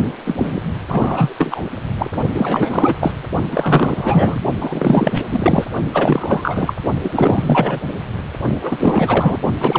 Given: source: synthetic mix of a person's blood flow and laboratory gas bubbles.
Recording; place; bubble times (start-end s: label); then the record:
Doppler ultrasound of blood flow; precordium
0.25-0.61 s: bubbles
0.88-1.33 s: bubbles
1.38-1.61 s: bubbles
1.98-2.10 s: bubbles
2.34-2.94 s: bubbles
3.00-3.14 s: bubbles
3.48-4.41 s: bubbles
4.61-5.22 s: bubbles
5.31-5.67 s: bubbles
5.93-6.74 s: bubbles
7.03-7.80 s: bubbles
8.62-9.38 s: bubbles
9.59-9.79 s: bubbles
From the record:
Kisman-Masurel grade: 444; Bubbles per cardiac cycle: continuous sound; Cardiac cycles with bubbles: 100%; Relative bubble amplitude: maximal (0.775 to 0.999); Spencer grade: 4 (maximum detectable bubble signal sounding continuously throughout systole and diastole of every cardiac period, and overriding the amplitude of the normal cardiac signals); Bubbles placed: only in the low amplitude regions of the cardiac cycle